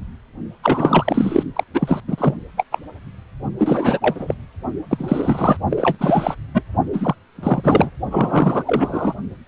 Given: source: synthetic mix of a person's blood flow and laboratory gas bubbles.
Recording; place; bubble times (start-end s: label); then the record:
Doppler ultrasound of blood flow; precordium
0.62-1.43 s: bubbles
1.55-1.64 s: bubbles
1.73-2.00 s: bubbles
2.08-2.34 s: bubbles
2.56-2.65 s: bubbles
2.71-2.79 s: bubbles
3.58-4.34 s: bubbles
4.89-5.57 s: bubbles
5.69-6.35 s: bubbles
6.54-6.63 s: bubbles
6.92-7.15 s: bubbles
7.35-7.91 s: bubbles
8.11-8.63 s: bubbles
8.66-9.14 s: bubbles
From the record:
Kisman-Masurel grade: 333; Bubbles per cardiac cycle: rolling drumbeat, 9 or more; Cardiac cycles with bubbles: 50 to 99%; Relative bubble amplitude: loud (0.450 to 0.775); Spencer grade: 3 (all of the cardiac periods contain showers or single bubble signals, but not dominating or overriding the cardiac motion signals); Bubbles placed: only in the low amplitude regions of the cardiac cycle